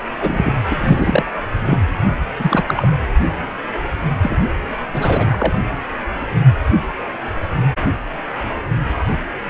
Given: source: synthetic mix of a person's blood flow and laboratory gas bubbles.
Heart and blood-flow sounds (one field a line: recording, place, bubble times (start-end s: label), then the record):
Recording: Doppler ultrasound of blood flow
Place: precordium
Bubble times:
0.14-0.52 s: bubbles
0.70-0.75 s: bubbles
0.79-1.25 s: bubbles
1.65-1.78 s: bubbles
2.39-2.63 s: bubbles
2.67-2.91 s: bubbles
4.22-4.38 s: bubbles
4.94-5.57 s: bubbles
From the record:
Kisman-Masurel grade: 223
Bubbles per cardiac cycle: several, 3 to 8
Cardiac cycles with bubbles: 10 to 50%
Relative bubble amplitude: loud (0.450 to 0.775)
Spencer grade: 2 (many but less than half of the cardiac periods contain bubble signals, singularly or in groups)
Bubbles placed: anywhere in the cardiac cycle